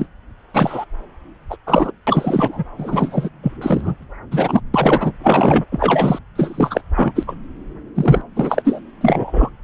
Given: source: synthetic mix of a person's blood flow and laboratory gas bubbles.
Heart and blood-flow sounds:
Doppler ultrasound of blood flow; subclavian vein
0.00-0.07 s: bubbles
0.54-0.85 s: bubbles
1.49-1.56 s: bubbles
1.67-1.91 s: bubbles
2.07-2.63 s: bubbles
2.78-3.29 s: bubbles
3.42-3.52 s: bubbles
3.61-3.96 s: bubbles
4.31-4.60 s: bubbles
4.74-5.12 s: bubbles
5.23-5.63 s: bubbles
5.71-6.19 s: bubbles
6.35-6.81 s: bubbles
6.95-7.12 s: bubbles
7.15-7.35 s: bubbles
7.95-8.21 s: bubbles
8.36-8.80 s: bubbles
9.01-9.50 s: bubbles
From the record:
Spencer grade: 3 (all of the cardiac periods contain showers or single bubble signals, but not dominating or overriding the cardiac motion signals); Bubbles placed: anywhere in the cardiac cycle

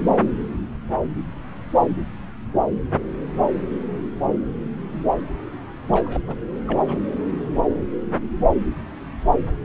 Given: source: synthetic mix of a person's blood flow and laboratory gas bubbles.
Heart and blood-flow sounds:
Doppler ultrasound of blood flow; subclavian vein
5.88-6.21 s: bubbles
6.27-6.35 s: bubbles
6.67-6.98 s: bubbles
From the record:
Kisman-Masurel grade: 211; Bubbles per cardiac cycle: several, 3 to 8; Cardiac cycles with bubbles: 1 to 10%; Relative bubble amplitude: barely perceptible (0.100 to 0.250); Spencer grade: 1 (occasional bubble signal discernible with the cardiac motion signal, with majority of cardiac periods free of bubbles); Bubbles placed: anywhere in the cardiac cycle

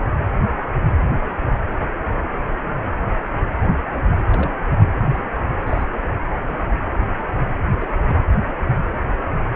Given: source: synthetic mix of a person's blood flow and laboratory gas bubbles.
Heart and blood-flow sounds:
Doppler ultrasound of blood flow; precordium
4.30-4.54 s: bubbles
5.10-5.24 s: bubbles
5.67-5.86 s: bubbles
6.48-6.57 s: bubbles
7.72-7.76 s: bubbles
7.81-7.87 s: bubbles
From the record:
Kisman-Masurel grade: 121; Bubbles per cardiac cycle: 1 to 2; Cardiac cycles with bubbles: 10 to 50%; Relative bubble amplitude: barely perceptible (0.100 to 0.250); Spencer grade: 2 (many but less than half of the cardiac periods contain bubble signals, singularly or in groups); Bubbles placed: anywhere in the cardiac cycle

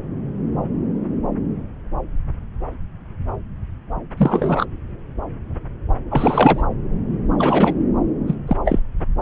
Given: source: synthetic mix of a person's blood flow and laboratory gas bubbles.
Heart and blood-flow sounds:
Doppler ultrasound of blood flow; subclavian vein
4.17-4.65 s: bubbles
6.10-6.63 s: bubbles
7.38-7.75 s: bubbles
8.27-8.35 s: bubbles
8.47-8.56 s: bubbles
8.65-8.79 s: bubbles
From the record:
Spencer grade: 2 (many but less than half of the cardiac periods contain bubble signals, singularly or in groups); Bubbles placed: anywhere in the cardiac cycle

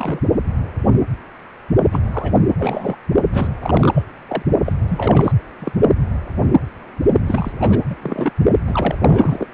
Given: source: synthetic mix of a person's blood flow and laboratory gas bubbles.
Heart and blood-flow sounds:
Doppler ultrasound of blood flow; precordium
0.00-0.20 s: bubbles
1.92-1.99 s: bubbles
2.12-2.32 s: bubbles
2.58-2.96 s: bubbles
3.32-3.54 s: bubbles
3.62-4.03 s: bubbles
4.29-4.42 s: bubbles
4.64-4.72 s: bubbles
4.88-5.32 s: bubbles
5.58-5.72 s: bubbles
7.26-7.51 s: bubbles
7.59-7.79 s: bubbles
7.89-7.96 s: bubbles
8.02-8.31 s: bubbles
8.67-9.46 s: bubbles
From the record:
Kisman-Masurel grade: 333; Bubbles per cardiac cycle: rolling drumbeat, 9 or more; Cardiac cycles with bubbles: 50 to 99%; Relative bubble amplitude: loud (0.450 to 0.775); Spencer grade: 3 (all of the cardiac periods contain showers or single bubble signals, but not dominating or overriding the cardiac motion signals); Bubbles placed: only in the low amplitude regions of the cardiac cycle

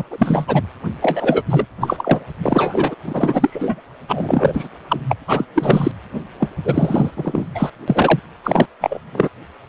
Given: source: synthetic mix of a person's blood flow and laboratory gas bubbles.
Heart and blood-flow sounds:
Doppler ultrasound of blood flow; precordium
0.00-0.03 s: bubbles
0.11-0.62 s: bubbles
1.02-1.42 s: bubbles
1.50-1.66 s: bubbles
1.81-2.24 s: bubbles
2.43-2.95 s: bubbles
3.05-3.82 s: bubbles
4.08-4.69 s: bubbles
4.88-5.00 s: bubbles
5.08-5.13 s: bubbles
5.27-5.45 s: bubbles
5.54-5.92 s: bubbles
6.40-6.49 s: bubbles
6.65-7.12 s: bubbles
7.17-7.46 s: bubbles
7.54-7.70 s: bubbles
7.88-8.20 s: bubbles
8.44-8.66 s: bubbles
8.80-8.98 s: bubbles
9.12-9.29 s: bubbles
From the record:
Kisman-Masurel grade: 343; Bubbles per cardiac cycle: rolling drumbeat, 9 or more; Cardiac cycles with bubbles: 100%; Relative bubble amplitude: loud (0.450 to 0.775); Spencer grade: 3 (all of the cardiac periods contain showers or single bubble signals, but not dominating or overriding the cardiac motion signals); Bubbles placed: anywhere in the cardiac cycle

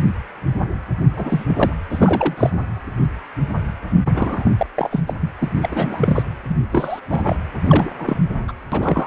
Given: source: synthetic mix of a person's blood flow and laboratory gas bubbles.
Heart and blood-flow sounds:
Doppler ultrasound of blood flow; precordium
1.16-1.44 s: bubbles
1.48-1.73 s: bubbles
1.90-2.50 s: bubbles
4.12-4.53 s: bubbles
4.57-4.66 s: bubbles
4.76-5.01 s: bubbles
5.07-5.14 s: bubbles
5.21-5.34 s: bubbles
5.39-5.51 s: bubbles
5.62-6.22 s: bubbles
6.48-6.55 s: bubbles
6.71-6.99 s: bubbles
7.10-7.37 s: bubbles
7.63-7.89 s: bubbles
7.99-8.21 s: bubbles
8.47-8.52 s: bubbles
8.71-9.07 s: bubbles
From the record:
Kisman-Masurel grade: 332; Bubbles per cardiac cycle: rolling drumbeat, 9 or more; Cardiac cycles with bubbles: 50 to 99%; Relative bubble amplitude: moderate (0.250 to 0.450); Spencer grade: 3 (all of the cardiac periods contain showers or single bubble signals, but not dominating or overriding the cardiac motion signals); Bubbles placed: anywhere in the cardiac cycle

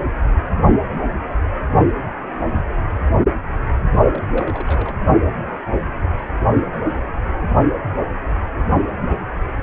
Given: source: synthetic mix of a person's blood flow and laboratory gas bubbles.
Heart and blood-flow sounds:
Doppler ultrasound of blood flow; precordium
4.14-4.96 s: bubbles
From the record:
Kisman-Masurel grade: 211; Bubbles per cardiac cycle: several, 3 to 8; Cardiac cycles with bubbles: 1 to 10%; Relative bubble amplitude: barely perceptible (0.100 to 0.250); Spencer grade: 1 (occasional bubble signal discernible with the cardiac motion signal, with majority of cardiac periods free of bubbles); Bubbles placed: anywhere in the cardiac cycle

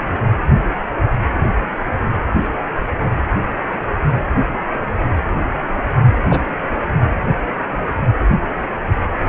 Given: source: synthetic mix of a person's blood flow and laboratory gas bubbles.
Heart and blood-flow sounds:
Doppler ultrasound of blood flow; precordium
6.29-6.42 s: bubbles
From the record:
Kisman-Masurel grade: 113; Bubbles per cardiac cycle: 1 to 2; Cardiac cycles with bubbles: 1 to 10%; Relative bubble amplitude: loud (0.450 to 0.775); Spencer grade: 1 (occasional bubble signal discernible with the cardiac motion signal, with majority of cardiac periods free of bubbles); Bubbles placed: anywhere in the cardiac cycle

